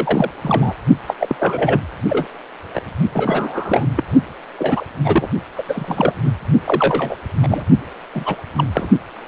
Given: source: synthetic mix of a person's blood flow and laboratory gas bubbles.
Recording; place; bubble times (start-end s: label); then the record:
Doppler ultrasound of blood flow; precordium
0.00-0.30 s: bubbles
0.42-0.74 s: bubbles
1.07-1.14 s: bubbles
1.20-1.36 s: bubbles
1.39-1.80 s: bubbles
2.09-2.28 s: bubbles
2.73-2.80 s: bubbles
3.13-3.86 s: bubbles
3.96-4.04 s: bubbles
4.58-4.85 s: bubbles
5.04-5.29 s: bubbles
5.56-5.62 s: bubbles
5.68-6.13 s: bubbles
6.23-6.30 s: bubbles
6.66-7.16 s: bubbles
7.42-7.64 s: bubbles
8.14-8.36 s: bubbles
8.57-8.65 s: bubbles
8.73-8.90 s: bubbles
From the record:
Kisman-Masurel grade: 243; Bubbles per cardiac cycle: several, 3 to 8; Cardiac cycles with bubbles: 100%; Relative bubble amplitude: loud (0.450 to 0.775); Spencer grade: 3 (all of the cardiac periods contain showers or single bubble signals, but not dominating or overriding the cardiac motion signals); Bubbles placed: only in the low amplitude regions of the cardiac cycle